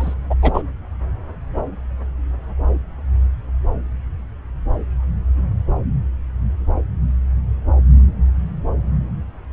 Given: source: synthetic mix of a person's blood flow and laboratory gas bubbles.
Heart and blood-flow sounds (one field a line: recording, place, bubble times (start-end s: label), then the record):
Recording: Doppler ultrasound of blood flow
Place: subclavian vein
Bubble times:
0.00-0.14 s: bubbles
0.30-0.34 s: bubbles
0.42-0.63 s: bubbles
From the record:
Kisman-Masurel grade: 213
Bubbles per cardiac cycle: several, 3 to 8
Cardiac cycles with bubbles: 1 to 10%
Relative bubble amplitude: loud (0.450 to 0.775)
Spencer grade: 1 (occasional bubble signal discernible with the cardiac motion signal, with majority of cardiac periods free of bubbles)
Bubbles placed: anywhere in the cardiac cycle